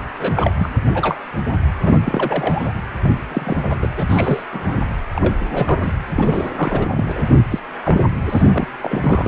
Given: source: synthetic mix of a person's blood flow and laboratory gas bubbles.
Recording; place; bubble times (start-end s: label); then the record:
Doppler ultrasound of blood flow; precordium
0.18-0.51 s: bubbles
0.58-0.69 s: bubbles
0.94-1.17 s: bubbles
1.48-1.54 s: bubbles
1.83-2.72 s: bubbles
3.04-3.10 s: bubbles
3.31-3.56 s: bubbles
3.63-3.76 s: bubbles
3.82-3.88 s: bubbles
3.98-4.05 s: bubbles
4.09-4.44 s: bubbles
4.52-4.79 s: bubbles
5.13-5.35 s: bubbles
5.54-5.79 s: bubbles
5.82-5.93 s: bubbles
6.16-6.50 s: bubbles
6.55-7.12 s: bubbles
7.15-7.29 s: bubbles
7.34-7.45 s: bubbles
7.50-7.59 s: bubbles
7.83-8.06 s: bubbles
8.29-8.42 s: bubbles
8.52-8.67 s: bubbles
8.82-9.28 s: bubbles
From the record:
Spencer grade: 3 (all of the cardiac periods contain showers or single bubble signals, but not dominating or overriding the cardiac motion signals); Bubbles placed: anywhere in the cardiac cycle